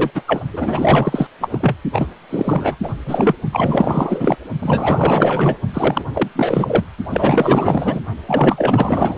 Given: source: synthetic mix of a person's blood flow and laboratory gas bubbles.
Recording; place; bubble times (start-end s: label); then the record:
Doppler ultrasound of blood flow; precordium
0.00-0.10 s: bubbles
0.14-0.22 s: bubbles
0.27-0.41 s: bubbles
0.52-1.27 s: bubbles
1.40-1.48 s: bubbles
1.51-1.76 s: bubbles
1.92-2.07 s: bubbles
2.29-2.76 s: bubbles
2.82-2.92 s: bubbles
3.06-3.35 s: bubbles
3.51-4.37 s: bubbles
4.59-5.56 s: bubbles
5.72-6.04 s: bubbles
6.14-6.29 s: bubbles
6.35-6.84 s: bubbles
7.09-8.04 s: bubbles
8.27-9.15 s: bubbles
From the record:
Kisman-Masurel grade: 444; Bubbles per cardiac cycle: continuous sound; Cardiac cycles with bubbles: 100%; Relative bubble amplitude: maximal (0.775 to 0.999); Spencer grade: 4 (maximum detectable bubble signal sounding continuously throughout systole and diastole of every cardiac period, and overriding the amplitude of the normal cardiac signals); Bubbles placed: only in the low amplitude regions of the cardiac cycle